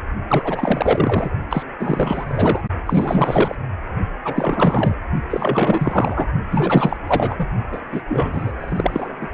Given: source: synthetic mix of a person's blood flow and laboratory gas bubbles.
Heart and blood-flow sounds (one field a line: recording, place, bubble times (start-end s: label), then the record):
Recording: Doppler ultrasound of blood flow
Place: precordium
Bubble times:
0.28-1.31 s: bubbles
1.49-1.63 s: bubbles
1.78-2.61 s: bubbles
2.86-3.56 s: bubbles
4.24-4.95 s: bubbles
5.29-6.27 s: bubbles
6.51-6.97 s: bubbles
7.07-7.47 s: bubbles
7.72-7.79 s: bubbles
7.91-8.02 s: bubbles
8.08-8.53 s: bubbles
8.59-9.13 s: bubbles
9.21-9.29 s: bubbles
From the record:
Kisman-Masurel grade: 444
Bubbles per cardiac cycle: continuous sound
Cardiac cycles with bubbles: 100%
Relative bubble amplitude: maximal (0.775 to 0.999)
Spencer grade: 4 (maximum detectable bubble signal sounding continuously throughout systole and diastole of every cardiac period, and overriding the amplitude of the normal cardiac signals)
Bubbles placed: only in the low amplitude regions of the cardiac cycle